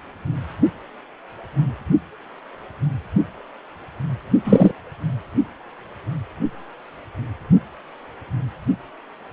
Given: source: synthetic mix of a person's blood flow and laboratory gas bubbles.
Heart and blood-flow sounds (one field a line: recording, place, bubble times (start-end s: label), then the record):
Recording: Doppler ultrasound of blood flow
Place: precordium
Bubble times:
4.44-4.71 s: bubbles
From the record:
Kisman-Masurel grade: 113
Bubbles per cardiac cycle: 1 to 2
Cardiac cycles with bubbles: 1 to 10%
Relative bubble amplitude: loud (0.450 to 0.775)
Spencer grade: 1 (occasional bubble signal discernible with the cardiac motion signal, with majority of cardiac periods free of bubbles)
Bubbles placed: only in the low amplitude regions of the cardiac cycle